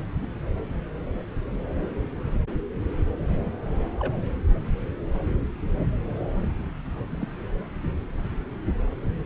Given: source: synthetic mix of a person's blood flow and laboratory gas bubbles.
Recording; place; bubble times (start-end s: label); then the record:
Doppler ultrasound of blood flow; subclavian vein
0.21-0.26 s: bubbles
4.00-4.13 s: bubbles
7.09-7.27 s: bubbles
From the record:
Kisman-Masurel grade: 121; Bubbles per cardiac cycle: 1 to 2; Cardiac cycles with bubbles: 10 to 50%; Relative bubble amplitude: barely perceptible (0.100 to 0.250); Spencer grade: 2 (many but less than half of the cardiac periods contain bubble signals, singularly or in groups); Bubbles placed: anywhere in the cardiac cycle